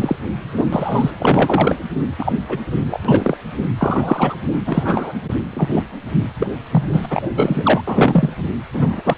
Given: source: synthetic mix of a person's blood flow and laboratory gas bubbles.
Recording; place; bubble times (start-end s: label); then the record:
Doppler ultrasound of blood flow; precordium
0.00-0.16 s: bubbles
0.57-0.67 s: bubbles
0.73-1.10 s: bubbles
1.20-1.76 s: bubbles
2.18-2.32 s: bubbles
2.48-2.58 s: bubbles
2.86-3.00 s: bubbles
3.04-3.37 s: bubbles
3.77-4.37 s: bubbles
4.67-5.14 s: bubbles
5.53-5.83 s: bubbles
6.40-6.48 s: bubbles
6.71-7.06 s: bubbles
7.10-7.29 s: bubbles
7.36-7.82 s: bubbles
7.87-8.29 s: bubbles
8.73-9.14 s: bubbles
From the record:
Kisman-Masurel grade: 243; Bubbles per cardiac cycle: several, 3 to 8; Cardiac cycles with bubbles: 100%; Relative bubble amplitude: loud (0.450 to 0.775); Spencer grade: 3 (all of the cardiac periods contain showers or single bubble signals, but not dominating or overriding the cardiac motion signals); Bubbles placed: anywhere in the cardiac cycle